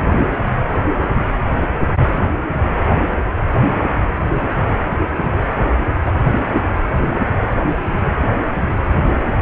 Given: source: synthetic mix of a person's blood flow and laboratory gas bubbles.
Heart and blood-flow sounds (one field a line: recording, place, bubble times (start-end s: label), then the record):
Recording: Doppler ultrasound of blood flow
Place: precordium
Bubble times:
6.05-6.12 s: bubbles
From the record:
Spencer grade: 1 (occasional bubble signal discernible with the cardiac motion signal, with majority of cardiac periods free of bubbles)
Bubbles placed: anywhere in the cardiac cycle